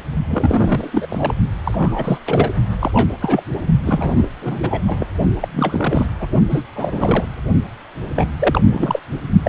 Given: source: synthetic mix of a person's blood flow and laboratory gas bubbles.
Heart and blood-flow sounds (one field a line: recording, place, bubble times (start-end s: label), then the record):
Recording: Doppler ultrasound of blood flow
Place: precordium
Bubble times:
0.27-1.06 s: bubbles
1.10-1.33 s: bubbles
1.64-2.18 s: bubbles
2.26-2.52 s: bubbles
2.79-2.91 s: bubbles
2.94-3.12 s: bubbles
3.21-3.43 s: bubbles
3.85-4.27 s: bubbles
4.42-4.81 s: bubbles
4.86-5.06 s: bubbles
5.40-5.48 s: bubbles
5.51-6.09 s: bubbles
6.20-6.27 s: bubbles
6.50-6.62 s: bubbles
6.75-7.25 s: bubbles
8.16-8.27 s: bubbles
8.39-8.61 s: bubbles
8.65-9.00 s: bubbles
9.44-9.49 s: bubbles
From the record:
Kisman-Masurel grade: 342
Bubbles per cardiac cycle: rolling drumbeat, 9 or more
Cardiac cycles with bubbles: 100%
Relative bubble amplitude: moderate (0.250 to 0.450)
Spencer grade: 3 (all of the cardiac periods contain showers or single bubble signals, but not dominating or overriding the cardiac motion signals)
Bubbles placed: only in the low amplitude regions of the cardiac cycle